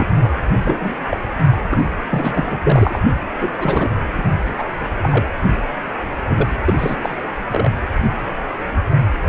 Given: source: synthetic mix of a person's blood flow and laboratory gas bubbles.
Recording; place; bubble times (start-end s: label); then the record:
Doppler ultrasound of blood flow; precordium
0.00-0.33 s: bubbles
0.65-0.95 s: bubbles
1.10-1.18 s: bubbles
1.53-1.62 s: bubbles
1.69-1.79 s: bubbles
2.10-2.58 s: bubbles
2.62-2.99 s: bubbles
3.10-3.18 s: bubbles
3.41-3.49 s: bubbles
3.57-3.89 s: bubbles
4.18-4.23 s: bubbles
4.38-4.63 s: bubbles
5.02-5.27 s: bubbles
6.29-6.48 s: bubbles
6.65-6.73 s: bubbles
6.78-6.96 s: bubbles
7.02-7.18 s: bubbles
7.52-7.70 s: bubbles
From the record:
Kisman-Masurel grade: 232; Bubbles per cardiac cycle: several, 3 to 8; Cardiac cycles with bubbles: 50 to 99%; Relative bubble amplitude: moderate (0.250 to 0.450); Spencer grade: 3 (all of the cardiac periods contain showers or single bubble signals, but not dominating or overriding the cardiac motion signals); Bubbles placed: anywhere in the cardiac cycle